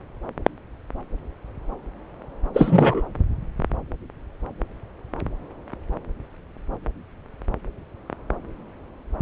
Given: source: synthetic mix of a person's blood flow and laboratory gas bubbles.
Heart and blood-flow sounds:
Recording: Doppler ultrasound of blood flow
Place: subclavian vein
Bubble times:
2.53-3.02 s: bubbles
From the record:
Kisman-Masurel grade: 213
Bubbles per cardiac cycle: several, 3 to 8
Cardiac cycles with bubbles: 1 to 10%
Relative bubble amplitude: loud (0.450 to 0.775)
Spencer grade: 1 (occasional bubble signal discernible with the cardiac motion signal, with majority of cardiac periods free of bubbles)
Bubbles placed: anywhere in the cardiac cycle

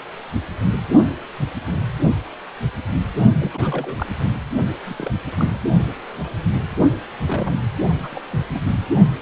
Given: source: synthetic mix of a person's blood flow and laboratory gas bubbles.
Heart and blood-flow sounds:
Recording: Doppler ultrasound of blood flow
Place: precordium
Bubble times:
3.39-4.06 s: bubbles
4.86-5.12 s: bubbles
5.38-5.58 s: bubbles
7.25-7.57 s: bubbles
7.80-8.21 s: bubbles
8.29-8.42 s: bubbles
8.53-8.62 s: bubbles
8.67-8.73 s: bubbles
From the record:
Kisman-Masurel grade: 221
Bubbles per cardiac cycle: several, 3 to 8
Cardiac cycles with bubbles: 10 to 50%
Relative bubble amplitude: barely perceptible (0.100 to 0.250)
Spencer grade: 2 (many but less than half of the cardiac periods contain bubble signals, singularly or in groups)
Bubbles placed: only in the low amplitude regions of the cardiac cycle

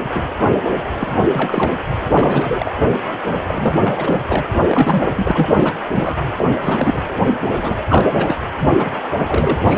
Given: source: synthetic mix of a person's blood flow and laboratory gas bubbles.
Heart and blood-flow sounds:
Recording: Doppler ultrasound of blood flow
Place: precordium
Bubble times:
0.00-0.11 s: bubbles
0.15-0.24 s: bubbles
0.99-1.18 s: bubbles
1.31-1.75 s: bubbles
2.09-2.71 s: bubbles
3.34-3.40 s: bubbles
3.46-4.22 s: bubbles
4.28-4.46 s: bubbles
4.61-5.72 s: bubbles
5.91-6.18 s: bubbles
6.37-6.46 s: bubbles
6.61-7.03 s: bubbles
7.41-8.36 s: bubbles
8.58-8.90 s: bubbles
9.19-9.61 s: bubbles
9.66-9.78 s: bubbles
From the record:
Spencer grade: 3 (all of the cardiac periods contain showers or single bubble signals, but not dominating or overriding the cardiac motion signals)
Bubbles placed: anywhere in the cardiac cycle

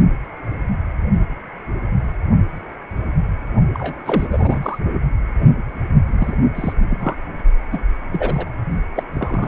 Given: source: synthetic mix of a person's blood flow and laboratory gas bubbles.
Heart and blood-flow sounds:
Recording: Doppler ultrasound of blood flow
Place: precordium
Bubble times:
3.73-3.94 s: bubbles
4.05-4.27 s: bubbles
4.31-4.59 s: bubbles
4.62-4.79 s: bubbles
6.18-6.34 s: bubbles
6.54-6.73 s: bubbles
6.88-7.15 s: bubbles
7.71-7.79 s: bubbles
8.12-8.46 s: bubbles
8.96-9.03 s: bubbles
9.14-9.48 s: bubbles
From the record:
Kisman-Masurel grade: 232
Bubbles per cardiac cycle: several, 3 to 8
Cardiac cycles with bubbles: 50 to 99%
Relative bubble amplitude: moderate (0.250 to 0.450)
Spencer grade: 3 (all of the cardiac periods contain showers or single bubble signals, but not dominating or overriding the cardiac motion signals)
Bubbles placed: only in the low amplitude regions of the cardiac cycle

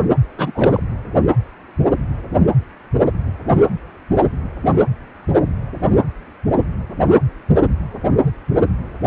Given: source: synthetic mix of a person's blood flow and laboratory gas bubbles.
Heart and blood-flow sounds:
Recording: Doppler ultrasound of blood flow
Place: precordium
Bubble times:
0.37-0.83 s: bubbles
From the record:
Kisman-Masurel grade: 212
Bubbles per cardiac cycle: several, 3 to 8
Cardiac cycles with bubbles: 1 to 10%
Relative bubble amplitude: moderate (0.250 to 0.450)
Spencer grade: 1 (occasional bubble signal discernible with the cardiac motion signal, with majority of cardiac periods free of bubbles)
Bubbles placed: anywhere in the cardiac cycle

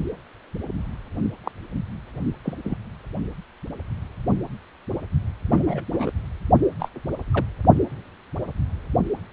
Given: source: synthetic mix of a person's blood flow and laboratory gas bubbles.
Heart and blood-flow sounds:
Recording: Doppler ultrasound of blood flow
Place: precordium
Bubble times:
1.44-1.52 s: bubbles
2.44-2.57 s: bubbles
2.64-2.77 s: bubbles
5.48-5.63 s: bubbles
5.66-5.83 s: bubbles
5.92-6.12 s: bubbles
6.79-6.88 s: bubbles
7.31-7.45 s: bubbles
From the record:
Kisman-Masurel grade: 221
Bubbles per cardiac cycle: several, 3 to 8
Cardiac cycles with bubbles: 10 to 50%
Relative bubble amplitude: barely perceptible (0.100 to 0.250)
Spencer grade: 2 (many but less than half of the cardiac periods contain bubble signals, singularly or in groups)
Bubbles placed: only in the low amplitude regions of the cardiac cycle

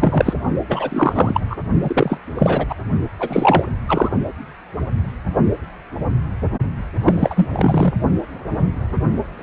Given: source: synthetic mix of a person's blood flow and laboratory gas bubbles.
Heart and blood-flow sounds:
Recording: Doppler ultrasound of blood flow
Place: precordium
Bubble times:
0.00-0.34 s: bubbles
0.68-1.41 s: bubbles
1.50-1.56 s: bubbles
1.82-2.19 s: bubbles
2.35-2.66 s: bubbles
2.69-2.76 s: bubbles
3.19-3.72 s: bubbles
3.88-4.09 s: bubbles
7.03-7.49 s: bubbles
7.52-7.94 s: bubbles
From the record:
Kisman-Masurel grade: 333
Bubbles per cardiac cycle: rolling drumbeat, 9 or more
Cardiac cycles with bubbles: 50 to 99%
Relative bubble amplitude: loud (0.450 to 0.775)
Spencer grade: 3 (all of the cardiac periods contain showers or single bubble signals, but not dominating or overriding the cardiac motion signals)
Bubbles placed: only in the low amplitude regions of the cardiac cycle

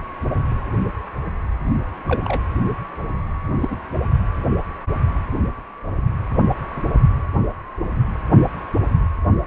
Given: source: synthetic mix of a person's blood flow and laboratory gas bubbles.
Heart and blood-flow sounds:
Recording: Doppler ultrasound of blood flow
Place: precordium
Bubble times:
2.08-2.40 s: bubbles
3.61-3.75 s: bubbles
From the record:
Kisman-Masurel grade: 122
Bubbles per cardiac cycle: 1 to 2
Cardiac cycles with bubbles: 10 to 50%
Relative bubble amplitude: moderate (0.250 to 0.450)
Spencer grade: 2 (many but less than half of the cardiac periods contain bubble signals, singularly or in groups)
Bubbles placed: anywhere in the cardiac cycle

